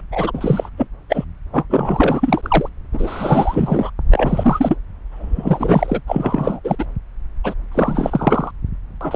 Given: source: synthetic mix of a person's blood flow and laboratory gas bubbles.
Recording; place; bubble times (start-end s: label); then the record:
Doppler ultrasound of blood flow; subclavian vein
0.12-0.70 s: bubbles
0.77-0.87 s: bubbles
1.09-1.25 s: bubbles
1.53-1.66 s: bubbles
1.70-2.69 s: bubbles
2.93-3.90 s: bubbles
4.11-4.75 s: bubbles
5.11-6.01 s: bubbles
6.07-6.61 s: bubbles
6.64-6.75 s: bubbles
6.79-6.85 s: bubbles
7.44-7.54 s: bubbles
7.71-8.51 s: bubbles
9.01-9.16 s: bubbles
From the record:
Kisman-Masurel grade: 333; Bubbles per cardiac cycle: rolling drumbeat, 9 or more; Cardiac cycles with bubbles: 50 to 99%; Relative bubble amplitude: loud (0.450 to 0.775); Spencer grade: 3 (all of the cardiac periods contain showers or single bubble signals, but not dominating or overriding the cardiac motion signals); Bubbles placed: anywhere in the cardiac cycle